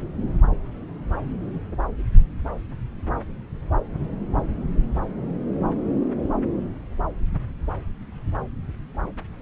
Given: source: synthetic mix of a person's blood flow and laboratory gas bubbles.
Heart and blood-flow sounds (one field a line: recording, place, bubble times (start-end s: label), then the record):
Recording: Doppler ultrasound of blood flow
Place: subclavian vein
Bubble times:
no bubbles
From the record:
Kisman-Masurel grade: 000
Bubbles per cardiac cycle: 0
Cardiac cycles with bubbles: 0%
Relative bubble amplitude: no bubbles discernible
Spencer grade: 0 (complete lack of bubble signals)